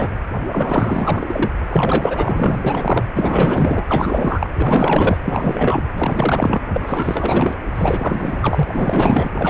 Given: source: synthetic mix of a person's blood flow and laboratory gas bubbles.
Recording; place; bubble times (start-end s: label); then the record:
Doppler ultrasound of blood flow; precordium
0.00-0.10 s: bubbles
0.52-1.50 s: bubbles
1.69-2.63 s: bubbles
2.66-3.04 s: bubbles
3.13-4.50 s: bubbles
4.56-5.17 s: bubbles
5.25-5.83 s: bubbles
5.96-6.64 s: bubbles
6.74-7.55 s: bubbles
7.75-8.63 s: bubbles
8.73-9.29 s: bubbles
9.35-9.50 s: bubbles
From the record:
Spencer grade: 4 (maximum detectable bubble signal sounding continuously throughout systole and diastole of every cardiac period, and overriding the amplitude of the normal cardiac signals); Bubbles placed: anywhere in the cardiac cycle